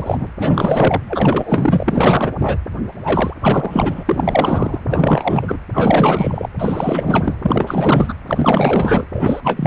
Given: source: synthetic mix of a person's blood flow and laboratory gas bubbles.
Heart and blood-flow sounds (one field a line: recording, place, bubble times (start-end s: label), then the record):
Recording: Doppler ultrasound of blood flow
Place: precordium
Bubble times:
0.00-0.27 s: bubbles
0.39-1.01 s: bubbles
1.07-2.32 s: bubbles
2.39-2.58 s: bubbles
3.03-3.33 s: bubbles
3.41-4.80 s: bubbles
4.87-5.58 s: bubbles
5.73-6.48 s: bubbles
6.59-7.35 s: bubbles
7.42-8.15 s: bubbles
8.27-9.04 s: bubbles
9.12-9.67 s: bubbles
From the record:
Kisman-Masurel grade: 444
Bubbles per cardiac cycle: continuous sound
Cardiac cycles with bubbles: 100%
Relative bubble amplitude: maximal (0.775 to 0.999)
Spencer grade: 4 (maximum detectable bubble signal sounding continuously throughout systole and diastole of every cardiac period, and overriding the amplitude of the normal cardiac signals)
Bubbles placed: anywhere in the cardiac cycle